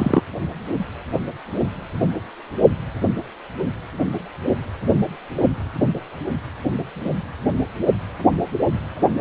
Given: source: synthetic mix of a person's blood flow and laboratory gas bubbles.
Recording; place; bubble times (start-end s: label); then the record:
Doppler ultrasound of blood flow; precordium
0.00-0.21 s: bubbles
From the record:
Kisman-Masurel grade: 123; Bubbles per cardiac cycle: 1 to 2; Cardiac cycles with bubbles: 10 to 50%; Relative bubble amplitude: loud (0.450 to 0.775); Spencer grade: 2 (many but less than half of the cardiac periods contain bubble signals, singularly or in groups); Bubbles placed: anywhere in the cardiac cycle